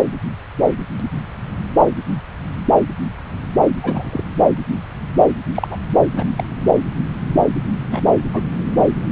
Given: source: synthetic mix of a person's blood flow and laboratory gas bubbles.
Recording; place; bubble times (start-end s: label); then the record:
Doppler ultrasound of blood flow; subclavian vein
0.00-0.06 s: bubbles
3.83-4.24 s: bubbles
5.54-5.76 s: bubbles
6.16-6.25 s: bubbles
6.36-6.44 s: bubbles
7.91-8.01 s: bubbles
8.33-8.44 s: bubbles
From the record:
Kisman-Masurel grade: 122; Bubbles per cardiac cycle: 1 to 2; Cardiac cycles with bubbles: 10 to 50%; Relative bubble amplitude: moderate (0.250 to 0.450); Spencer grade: 2 (many but less than half of the cardiac periods contain bubble signals, singularly or in groups); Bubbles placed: anywhere in the cardiac cycle